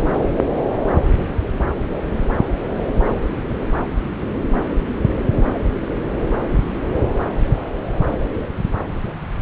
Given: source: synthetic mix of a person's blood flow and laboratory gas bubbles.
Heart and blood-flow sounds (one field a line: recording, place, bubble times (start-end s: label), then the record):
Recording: Doppler ultrasound of blood flow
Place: subclavian vein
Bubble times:
no bubbles
From the record:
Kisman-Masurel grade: 000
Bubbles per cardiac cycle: 0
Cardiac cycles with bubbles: 0%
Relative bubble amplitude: no bubbles discernible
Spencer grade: 0 (complete lack of bubble signals)